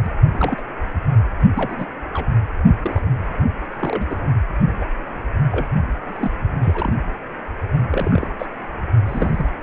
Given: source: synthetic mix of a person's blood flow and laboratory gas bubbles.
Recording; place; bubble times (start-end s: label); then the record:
Doppler ultrasound of blood flow; precordium
0.04-0.10 s: bubbles
0.33-0.62 s: bubbles
1.54-1.86 s: bubbles
2.13-2.27 s: bubbles
2.82-3.06 s: bubbles
3.79-4.06 s: bubbles
4.09-4.17 s: bubbles
4.79-4.86 s: bubbles
5.51-5.67 s: bubbles
6.06-6.31 s: bubbles
6.61-6.93 s: bubbles
7.91-8.28 s: bubbles
8.38-8.46 s: bubbles
9.05-9.52 s: bubbles
From the record:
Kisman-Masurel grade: 242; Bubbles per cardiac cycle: several, 3 to 8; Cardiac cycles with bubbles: 100%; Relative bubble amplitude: moderate (0.250 to 0.450); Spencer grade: 3 (all of the cardiac periods contain showers or single bubble signals, but not dominating or overriding the cardiac motion signals); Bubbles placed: only in the low amplitude regions of the cardiac cycle